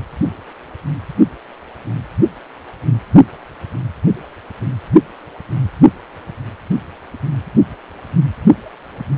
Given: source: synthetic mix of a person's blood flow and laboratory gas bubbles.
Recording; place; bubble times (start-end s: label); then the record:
Doppler ultrasound of blood flow; precordium
no bubbles
From the record:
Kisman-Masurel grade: 000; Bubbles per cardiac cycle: 0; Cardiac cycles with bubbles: 0%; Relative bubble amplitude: no bubbles discernible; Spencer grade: 0 (complete lack of bubble signals)